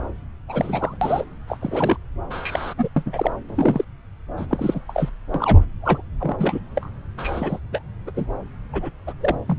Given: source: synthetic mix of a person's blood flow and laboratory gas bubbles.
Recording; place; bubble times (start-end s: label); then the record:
Doppler ultrasound of blood flow; subclavian vein
0.47-0.98 s: bubbles
1.01-1.24 s: bubbles
1.48-1.57 s: bubbles
1.61-1.97 s: bubbles
2.30-2.74 s: bubbles
2.78-2.88 s: bubbles
2.96-3.31 s: bubbles
3.49-3.85 s: bubbles
4.37-4.46 s: bubbles
4.50-4.80 s: bubbles
4.89-5.10 s: bubbles
5.34-5.63 s: bubbles
5.81-6.02 s: bubbles
6.20-6.60 s: bubbles
6.75-6.88 s: bubbles
7.17-7.59 s: bubbles
7.72-7.82 s: bubbles
8.06-8.11 s: bubbles
8.15-8.26 s: bubbles
8.72-8.92 s: bubbles
9.06-9.13 s: bubbles
9.20-9.37 s: bubbles
9.47-9.59 s: bubbles
From the record:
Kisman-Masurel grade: 242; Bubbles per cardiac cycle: several, 3 to 8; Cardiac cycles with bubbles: 100%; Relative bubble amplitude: moderate (0.250 to 0.450); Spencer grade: 3 (all of the cardiac periods contain showers or single bubble signals, but not dominating or overriding the cardiac motion signals); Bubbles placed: anywhere in the cardiac cycle